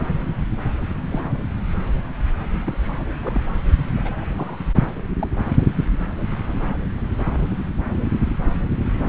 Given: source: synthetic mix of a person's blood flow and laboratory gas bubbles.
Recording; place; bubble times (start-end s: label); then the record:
Doppler ultrasound of blood flow; subclavian vein
1.09-1.21 s: bubbles
2.65-2.77 s: bubbles
2.79-2.96 s: bubbles
3.21-3.42 s: bubbles
3.77-3.89 s: bubbles
3.96-4.12 s: bubbles
4.37-4.58 s: bubbles
5.19-5.27 s: bubbles
From the record:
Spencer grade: 2 (many but less than half of the cardiac periods contain bubble signals, singularly or in groups); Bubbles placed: anywhere in the cardiac cycle